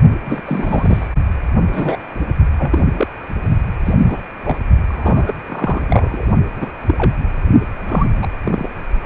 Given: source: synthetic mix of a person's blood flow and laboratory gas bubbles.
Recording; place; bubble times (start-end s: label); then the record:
Doppler ultrasound of blood flow; precordium
0.24-0.41 s: bubbles
0.45-1.08 s: bubbles
1.72-1.99 s: bubbles
2.57-2.84 s: bubbles
2.93-3.07 s: bubbles
3.85-3.95 s: bubbles
4.00-4.22 s: bubbles
4.43-4.56 s: bubbles
4.87-5.33 s: bubbles
5.48-5.81 s: bubbles
5.87-6.26 s: bubbles
6.56-6.71 s: bubbles
6.86-7.17 s: bubbles
7.87-8.05 s: bubbles
8.21-8.28 s: bubbles
8.45-8.68 s: bubbles
9.04-9.06 s: bubbles
From the record:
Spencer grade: 3 (all of the cardiac periods contain showers or single bubble signals, but not dominating or overriding the cardiac motion signals); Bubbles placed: only in the low amplitude regions of the cardiac cycle